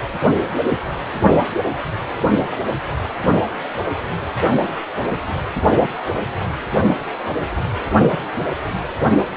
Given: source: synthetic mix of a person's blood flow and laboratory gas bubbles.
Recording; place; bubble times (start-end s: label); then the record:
Doppler ultrasound of blood flow; precordium
no bubbles
From the record:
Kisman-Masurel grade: 000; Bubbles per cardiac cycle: 0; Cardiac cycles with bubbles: 0%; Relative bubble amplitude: no bubbles discernible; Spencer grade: 0 (complete lack of bubble signals)